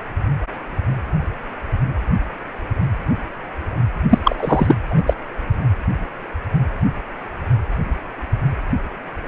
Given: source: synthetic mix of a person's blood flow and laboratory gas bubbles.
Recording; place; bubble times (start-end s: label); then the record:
Doppler ultrasound of blood flow; precordium
4.10-4.19 s: bubbles
4.24-4.75 s: bubbles
4.90-5.02 s: bubbles
5.06-5.13 s: bubbles
From the record:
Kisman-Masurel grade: 213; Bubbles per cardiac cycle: several, 3 to 8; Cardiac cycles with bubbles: 1 to 10%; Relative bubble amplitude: loud (0.450 to 0.775); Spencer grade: 1 (occasional bubble signal discernible with the cardiac motion signal, with majority of cardiac periods free of bubbles); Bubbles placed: only in the low amplitude regions of the cardiac cycle